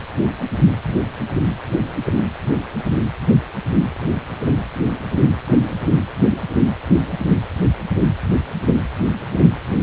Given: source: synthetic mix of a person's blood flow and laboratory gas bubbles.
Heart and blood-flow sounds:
Doppler ultrasound of blood flow; precordium
5.46-5.59 s: bubbles
From the record:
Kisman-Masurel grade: 112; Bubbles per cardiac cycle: 1 to 2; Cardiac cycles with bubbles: 1 to 10%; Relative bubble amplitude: moderate (0.250 to 0.450); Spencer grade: 1 (occasional bubble signal discernible with the cardiac motion signal, with majority of cardiac periods free of bubbles); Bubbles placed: anywhere in the cardiac cycle

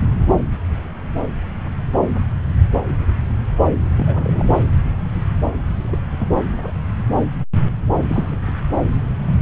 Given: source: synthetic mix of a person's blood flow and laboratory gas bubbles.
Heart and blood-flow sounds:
Doppler ultrasound of blood flow; subclavian vein
3.98-4.64 s: bubbles
5.90-5.98 s: bubbles
6.12-6.27 s: bubbles
6.45-6.71 s: bubbles
8.07-8.60 s: bubbles
8.72-8.79 s: bubbles
From the record:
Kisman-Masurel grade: 221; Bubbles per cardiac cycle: several, 3 to 8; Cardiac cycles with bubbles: 10 to 50%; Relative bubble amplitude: barely perceptible (0.100 to 0.250); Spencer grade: 2 (many but less than half of the cardiac periods contain bubble signals, singularly or in groups); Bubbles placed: anywhere in the cardiac cycle

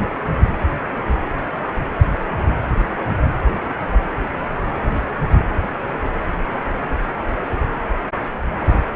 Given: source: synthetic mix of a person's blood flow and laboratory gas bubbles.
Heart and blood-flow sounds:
Doppler ultrasound of blood flow; precordium
no bubbles
From the record:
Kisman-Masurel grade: 000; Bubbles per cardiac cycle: 0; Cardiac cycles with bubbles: 0%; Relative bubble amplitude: no bubbles discernible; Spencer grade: 0 (complete lack of bubble signals)

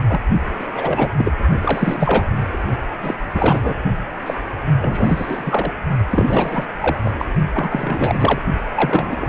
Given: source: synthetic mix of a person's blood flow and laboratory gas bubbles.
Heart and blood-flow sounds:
Doppler ultrasound of blood flow; precordium
0.07-0.20 s: bubbles
0.59-0.66 s: bubbles
0.75-1.11 s: bubbles
1.17-1.32 s: bubbles
1.61-2.25 s: bubbles
2.53-2.58 s: bubbles
3.02-3.15 s: bubbles
3.34-3.74 s: bubbles
4.26-4.34 s: bubbles
4.80-5.71 s: bubbles
6.11-6.66 s: bubbles
6.81-6.98 s: bubbles
7.04-7.12 s: bubbles
7.18-7.26 s: bubbles
7.54-8.42 s: bubbles
8.74-9.29 s: bubbles
From the record:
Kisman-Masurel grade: 343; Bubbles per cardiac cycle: rolling drumbeat, 9 or more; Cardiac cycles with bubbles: 100%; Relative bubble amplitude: loud (0.450 to 0.775); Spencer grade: 3 (all of the cardiac periods contain showers or single bubble signals, but not dominating or overriding the cardiac motion signals); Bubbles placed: only in the low amplitude regions of the cardiac cycle

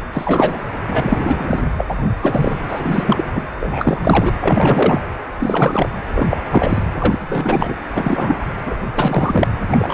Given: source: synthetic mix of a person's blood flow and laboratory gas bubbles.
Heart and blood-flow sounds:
Doppler ultrasound of blood flow; precordium
0.13-0.60 s: bubbles
0.87-1.67 s: bubbles
1.77-1.84 s: bubbles
1.89-2.10 s: bubbles
2.22-2.57 s: bubbles
2.69-3.25 s: bubbles
3.36-3.43 s: bubbles
3.60-4.32 s: bubbles
4.41-5.00 s: bubbles
5.40-5.94 s: bubbles
6.14-6.27 s: bubbles
6.29-6.37 s: bubbles
6.50-6.83 s: bubbles
7.00-7.75 s: bubbles
7.94-8.41 s: bubbles
8.66-8.76 s: bubbles
8.96-9.47 s: bubbles
9.71-9.93 s: bubbles
From the record:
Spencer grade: 3 (all of the cardiac periods contain showers or single bubble signals, but not dominating or overriding the cardiac motion signals); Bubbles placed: anywhere in the cardiac cycle

